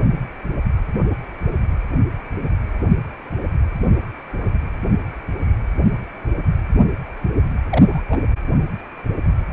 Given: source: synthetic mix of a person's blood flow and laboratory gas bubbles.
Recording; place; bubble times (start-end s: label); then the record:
Doppler ultrasound of blood flow; precordium
7.71-8.02 s: bubbles
8.08-8.21 s: bubbles
From the record:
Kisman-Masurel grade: 211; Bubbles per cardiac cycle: several, 3 to 8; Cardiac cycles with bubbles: 1 to 10%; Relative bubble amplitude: barely perceptible (0.100 to 0.250); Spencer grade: 1 (occasional bubble signal discernible with the cardiac motion signal, with majority of cardiac periods free of bubbles); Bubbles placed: anywhere in the cardiac cycle